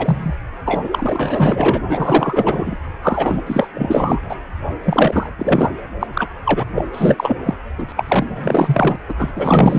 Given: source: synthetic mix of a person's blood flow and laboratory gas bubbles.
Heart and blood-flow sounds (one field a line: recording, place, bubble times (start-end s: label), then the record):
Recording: Doppler ultrasound of blood flow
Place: precordium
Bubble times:
0.00-0.35 s: bubbles
0.65-1.83 s: bubbles
1.89-2.75 s: bubbles
3.02-3.42 s: bubbles
3.46-3.68 s: bubbles
3.73-4.35 s: bubbles
4.83-5.33 s: bubbles
5.38-5.68 s: bubbles
6.00-6.06 s: bubbles
6.13-6.29 s: bubbles
6.45-6.66 s: bubbles
6.75-6.85 s: bubbles
6.93-7.37 s: bubbles
7.44-7.54 s: bubbles
7.78-7.92 s: bubbles
7.96-9.03 s: bubbles
9.09-9.14 s: bubbles
9.19-9.79 s: bubbles
From the record:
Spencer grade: 4 (maximum detectable bubble signal sounding continuously throughout systole and diastole of every cardiac period, and overriding the amplitude of the normal cardiac signals)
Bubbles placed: anywhere in the cardiac cycle